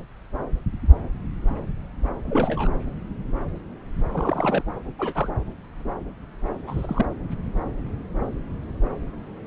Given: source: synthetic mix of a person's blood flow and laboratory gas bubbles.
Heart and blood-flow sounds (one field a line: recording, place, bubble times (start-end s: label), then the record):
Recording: Doppler ultrasound of blood flow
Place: subclavian vein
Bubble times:
2.26-2.75 s: bubbles
4.12-4.62 s: bubbles
4.99-5.29 s: bubbles
6.67-7.06 s: bubbles
From the record:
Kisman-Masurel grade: 221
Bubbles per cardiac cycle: several, 3 to 8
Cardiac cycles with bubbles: 10 to 50%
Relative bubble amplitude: barely perceptible (0.100 to 0.250)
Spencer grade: 2 (many but less than half of the cardiac periods contain bubble signals, singularly or in groups)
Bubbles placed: anywhere in the cardiac cycle